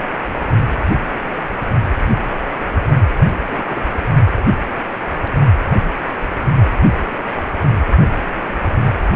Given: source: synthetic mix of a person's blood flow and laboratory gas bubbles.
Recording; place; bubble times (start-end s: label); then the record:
Doppler ultrasound of blood flow; precordium
3.47-3.80 s: bubbles
From the record:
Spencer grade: 2 (many but less than half of the cardiac periods contain bubble signals, singularly or in groups); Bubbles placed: only in the low amplitude regions of the cardiac cycle